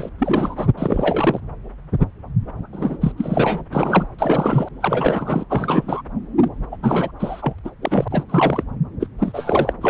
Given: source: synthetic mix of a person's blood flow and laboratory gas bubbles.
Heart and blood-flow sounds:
Doppler ultrasound of blood flow; subclavian vein
0.00-0.10 s: bubbles
0.18-0.68 s: bubbles
0.77-1.41 s: bubbles
2.73-2.98 s: bubbles
3.00-3.12 s: bubbles
3.17-3.61 s: bubbles
3.73-4.07 s: bubbles
4.18-4.68 s: bubbles
4.80-5.45 s: bubbles
5.50-6.01 s: bubbles
6.41-6.49 s: bubbles
6.71-6.77 s: bubbles
6.83-7.12 s: bubbles
7.18-7.53 s: bubbles
7.64-7.71 s: bubbles
7.82-8.08 s: bubbles
8.11-8.24 s: bubbles
8.29-8.64 s: bubbles
9.00-9.08 s: bubbles
9.19-9.73 s: bubbles
9.81-9.90 s: bubbles
From the record:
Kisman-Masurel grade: 333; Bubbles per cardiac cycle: rolling drumbeat, 9 or more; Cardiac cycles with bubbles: 50 to 99%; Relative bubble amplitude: loud (0.450 to 0.775); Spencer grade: 3 (all of the cardiac periods contain showers or single bubble signals, but not dominating or overriding the cardiac motion signals); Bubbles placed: anywhere in the cardiac cycle

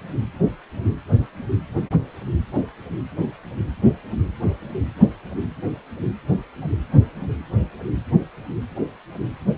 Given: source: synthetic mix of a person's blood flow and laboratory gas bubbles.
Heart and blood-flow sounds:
Doppler ultrasound of blood flow; precordium
no bubbles
From the record:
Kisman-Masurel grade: 000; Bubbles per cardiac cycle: 0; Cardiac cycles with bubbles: 0%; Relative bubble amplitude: no bubbles discernible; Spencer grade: 0 (complete lack of bubble signals)

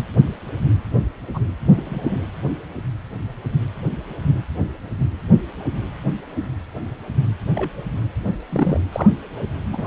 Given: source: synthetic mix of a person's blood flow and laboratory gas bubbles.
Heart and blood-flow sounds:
Doppler ultrasound of blood flow; precordium
1.33-1.40 s: bubbles
1.71-2.22 s: bubbles
7.55-7.70 s: bubbles
8.49-8.80 s: bubbles
8.92-9.10 s: bubbles
9.71-9.87 s: bubbles
From the record:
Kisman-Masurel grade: 121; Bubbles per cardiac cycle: 1 to 2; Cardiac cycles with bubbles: 10 to 50%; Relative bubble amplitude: barely perceptible (0.100 to 0.250); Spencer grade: 2 (many but less than half of the cardiac periods contain bubble signals, singularly or in groups); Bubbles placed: anywhere in the cardiac cycle

